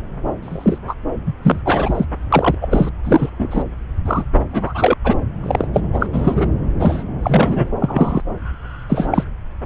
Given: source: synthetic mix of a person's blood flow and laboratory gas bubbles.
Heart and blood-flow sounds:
Doppler ultrasound of blood flow; subclavian vein
0.42-0.78 s: bubbles
0.87-0.95 s: bubbles
1.26-1.33 s: bubbles
1.43-1.59 s: bubbles
1.65-2.05 s: bubbles
2.32-2.55 s: bubbles
2.61-2.89 s: bubbles
3.03-3.30 s: bubbles
3.38-3.63 s: bubbles
4.05-4.25 s: bubbles
4.51-4.93 s: bubbles
5.04-5.16 s: bubbles
5.43-5.67 s: bubbles
5.73-5.80 s: bubbles
5.93-6.06 s: bubbles
6.12-6.46 s: bubbles
6.79-7.03 s: bubbles
7.23-7.68 s: bubbles
7.79-8.21 s: bubbles
8.89-9.24 s: bubbles
From the record:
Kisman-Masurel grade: 243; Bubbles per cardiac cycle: several, 3 to 8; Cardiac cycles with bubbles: 100%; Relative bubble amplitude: loud (0.450 to 0.775); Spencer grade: 3 (all of the cardiac periods contain showers or single bubble signals, but not dominating or overriding the cardiac motion signals); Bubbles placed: anywhere in the cardiac cycle

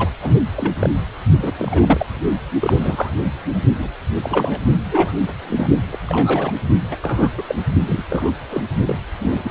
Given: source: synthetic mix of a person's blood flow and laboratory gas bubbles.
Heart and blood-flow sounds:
Doppler ultrasound of blood flow; precordium
0.00-0.09 s: bubbles
0.21-0.42 s: bubbles
0.56-0.73 s: bubbles
0.79-0.90 s: bubbles
1.39-1.51 s: bubbles
1.58-2.06 s: bubbles
2.59-3.14 s: bubbles
3.54-3.62 s: bubbles
3.79-3.88 s: bubbles
4.22-4.59 s: bubbles
4.91-5.12 s: bubbles
5.48-5.67 s: bubbles
5.92-5.98 s: bubbles
6.06-6.52 s: bubbles
6.90-6.96 s: bubbles
7.01-7.29 s: bubbles
7.38-7.42 s: bubbles
7.48-7.55 s: bubbles
7.87-8.04 s: bubbles
8.10-8.30 s: bubbles
8.49-8.63 s: bubbles
8.87-8.99 s: bubbles
9.20-9.51 s: bubbles
From the record:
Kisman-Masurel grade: 242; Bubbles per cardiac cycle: several, 3 to 8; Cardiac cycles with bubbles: 100%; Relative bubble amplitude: moderate (0.250 to 0.450); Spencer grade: 3 (all of the cardiac periods contain showers or single bubble signals, but not dominating or overriding the cardiac motion signals); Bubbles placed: only in the low amplitude regions of the cardiac cycle

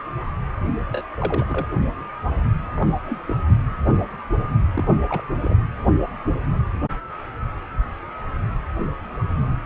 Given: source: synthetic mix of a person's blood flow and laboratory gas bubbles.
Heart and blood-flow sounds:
Doppler ultrasound of blood flow; precordium
0.91-1.02 s: bubbles
1.20-1.67 s: bubbles
2.76-2.85 s: bubbles
3.04-3.19 s: bubbles
3.27-3.35 s: bubbles
4.74-4.89 s: bubbles
5.09-5.22 s: bubbles
5.42-5.54 s: bubbles
From the record:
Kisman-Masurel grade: 221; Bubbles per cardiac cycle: several, 3 to 8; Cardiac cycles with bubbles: 10 to 50%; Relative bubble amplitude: barely perceptible (0.100 to 0.250); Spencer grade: 2 (many but less than half of the cardiac periods contain bubble signals, singularly or in groups); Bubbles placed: anywhere in the cardiac cycle

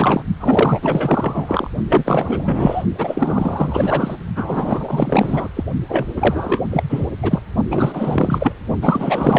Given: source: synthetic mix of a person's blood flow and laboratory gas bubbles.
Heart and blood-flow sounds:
Doppler ultrasound of blood flow; precordium
0.00-0.24 s: bubbles
0.40-1.70 s: bubbles
1.89-2.83 s: bubbles
2.98-4.16 s: bubbles
4.36-5.48 s: bubbles
5.56-5.63 s: bubbles
5.88-6.05 s: bubbles
6.16-6.62 s: bubbles
6.71-6.83 s: bubbles
6.89-7.06 s: bubbles
7.22-7.42 s: bubbles
7.70-8.53 s: bubbles
8.81-9.39 s: bubbles
From the record:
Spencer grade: 4 (maximum detectable bubble signal sounding continuously throughout systole and diastole of every cardiac period, and overriding the amplitude of the normal cardiac signals); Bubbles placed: only in the low amplitude regions of the cardiac cycle

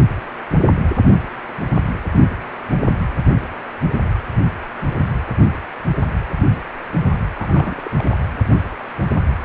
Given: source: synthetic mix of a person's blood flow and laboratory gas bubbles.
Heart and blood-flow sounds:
Doppler ultrasound of blood flow; precordium
7.35-7.91 s: bubbles
7.97-8.18 s: bubbles
From the record:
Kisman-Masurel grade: 211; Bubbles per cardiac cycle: several, 3 to 8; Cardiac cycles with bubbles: 1 to 10%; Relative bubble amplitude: barely perceptible (0.100 to 0.250); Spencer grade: 1 (occasional bubble signal discernible with the cardiac motion signal, with majority of cardiac periods free of bubbles); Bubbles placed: anywhere in the cardiac cycle

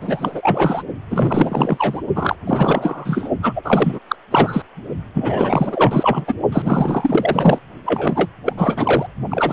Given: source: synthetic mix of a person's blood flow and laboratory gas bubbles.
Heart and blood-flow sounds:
Doppler ultrasound of blood flow; precordium
0.01-0.83 s: bubbles
1.10-2.00 s: bubbles
2.15-2.35 s: bubbles
2.46-3.29 s: bubbles
3.42-3.99 s: bubbles
4.08-4.15 s: bubbles
4.31-4.62 s: bubbles
5.14-6.34 s: bubbles
6.52-7.59 s: bubbles
7.84-8.29 s: bubbles
8.46-8.54 s: bubbles
8.57-9.06 s: bubbles
9.30-9.53 s: bubbles
From the record:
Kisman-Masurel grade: 444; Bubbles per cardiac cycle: continuous sound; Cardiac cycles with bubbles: 100%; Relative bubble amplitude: maximal (0.775 to 0.999); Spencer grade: 4 (maximum detectable bubble signal sounding continuously throughout systole and diastole of every cardiac period, and overriding the amplitude of the normal cardiac signals); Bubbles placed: only in the low amplitude regions of the cardiac cycle

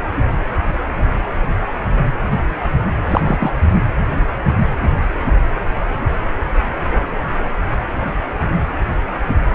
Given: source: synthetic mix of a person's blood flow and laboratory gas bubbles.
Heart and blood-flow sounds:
Doppler ultrasound of blood flow; precordium
3.08-3.21 s: bubbles
3.26-3.59 s: bubbles
From the record:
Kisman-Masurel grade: 212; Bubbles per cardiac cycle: several, 3 to 8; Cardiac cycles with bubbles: 1 to 10%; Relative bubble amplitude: moderate (0.250 to 0.450); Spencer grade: 1 (occasional bubble signal discernible with the cardiac motion signal, with majority of cardiac periods free of bubbles); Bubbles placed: anywhere in the cardiac cycle

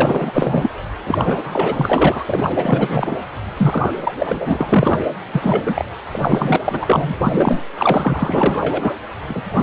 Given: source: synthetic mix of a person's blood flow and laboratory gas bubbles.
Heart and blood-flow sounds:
Doppler ultrasound of blood flow; precordium
0.00-0.74 s: bubbles
1.06-2.23 s: bubbles
2.28-3.17 s: bubbles
3.57-3.92 s: bubbles
3.96-4.13 s: bubbles
4.20-5.04 s: bubbles
5.32-5.85 s: bubbles
6.12-6.56 s: bubbles
6.64-7.15 s: bubbles
7.24-7.60 s: bubbles
7.76-8.94 s: bubbles
9.29-9.63 s: bubbles
From the record:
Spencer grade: 4 (maximum detectable bubble signal sounding continuously throughout systole and diastole of every cardiac period, and overriding the amplitude of the normal cardiac signals); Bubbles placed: anywhere in the cardiac cycle

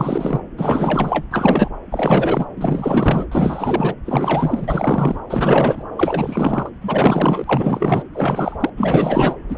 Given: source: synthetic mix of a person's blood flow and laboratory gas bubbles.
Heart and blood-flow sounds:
Doppler ultrasound of blood flow; subclavian vein
0.00-0.41 s: bubbles
0.57-1.25 s: bubbles
1.31-1.70 s: bubbles
1.91-2.45 s: bubbles
2.56-3.25 s: bubbles
3.31-3.94 s: bubbles
4.05-5.19 s: bubbles
5.29-5.83 s: bubbles
5.96-6.69 s: bubbles
6.81-8.03 s: bubbles
8.13-8.70 s: bubbles
8.77-9.36 s: bubbles
9.49-9.58 s: bubbles
From the record:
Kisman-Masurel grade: 444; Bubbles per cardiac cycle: continuous sound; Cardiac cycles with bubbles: 100%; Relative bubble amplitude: maximal (0.775 to 0.999); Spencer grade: 4 (maximum detectable bubble signal sounding continuously throughout systole and diastole of every cardiac period, and overriding the amplitude of the normal cardiac signals); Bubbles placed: anywhere in the cardiac cycle

